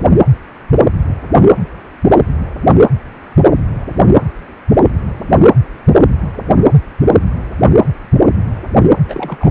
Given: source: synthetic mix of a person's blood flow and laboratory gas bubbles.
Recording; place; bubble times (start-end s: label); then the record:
Doppler ultrasound of blood flow; precordium
9.08-9.50 s: bubbles
From the record:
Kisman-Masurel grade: 212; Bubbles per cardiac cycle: several, 3 to 8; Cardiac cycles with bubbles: 1 to 10%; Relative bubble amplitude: moderate (0.250 to 0.450); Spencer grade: 1 (occasional bubble signal discernible with the cardiac motion signal, with majority of cardiac periods free of bubbles); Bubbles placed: anywhere in the cardiac cycle